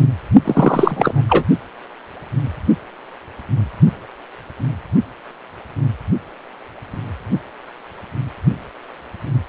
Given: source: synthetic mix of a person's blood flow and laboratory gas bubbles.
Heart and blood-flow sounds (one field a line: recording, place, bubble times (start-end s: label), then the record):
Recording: Doppler ultrasound of blood flow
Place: precordium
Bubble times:
0.44-1.26 s: bubbles
1.28-1.45 s: bubbles
From the record:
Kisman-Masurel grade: 213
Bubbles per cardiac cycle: several, 3 to 8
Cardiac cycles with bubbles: 1 to 10%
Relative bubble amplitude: loud (0.450 to 0.775)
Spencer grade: 1 (occasional bubble signal discernible with the cardiac motion signal, with majority of cardiac periods free of bubbles)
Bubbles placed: only in the low amplitude regions of the cardiac cycle